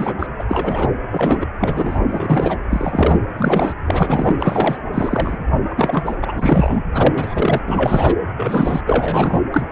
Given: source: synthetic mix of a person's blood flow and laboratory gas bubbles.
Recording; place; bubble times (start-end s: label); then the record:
Doppler ultrasound of blood flow; precordium
0.00-0.14 s: bubbles
0.19-0.27 s: bubbles
0.39-0.45 s: bubbles
0.48-0.91 s: bubbles
1.11-1.47 s: bubbles
1.59-2.00 s: bubbles
2.09-2.58 s: bubbles
2.70-3.20 s: bubbles
3.36-3.74 s: bubbles
3.86-4.36 s: bubbles
4.39-4.82 s: bubbles
4.92-5.36 s: bubbles
5.69-6.15 s: bubbles
6.22-6.83 s: bubbles
6.94-7.60 s: bubbles
7.66-8.16 s: bubbles
8.37-8.81 s: bubbles
8.87-9.40 s: bubbles
9.52-9.65 s: bubbles
From the record:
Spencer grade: 3 (all of the cardiac periods contain showers or single bubble signals, but not dominating or overriding the cardiac motion signals); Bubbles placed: anywhere in the cardiac cycle